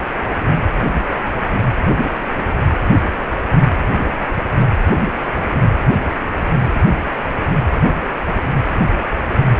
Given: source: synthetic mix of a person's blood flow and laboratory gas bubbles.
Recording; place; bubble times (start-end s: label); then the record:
Doppler ultrasound of blood flow; precordium
no bubbles
From the record:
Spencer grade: 0 (complete lack of bubble signals)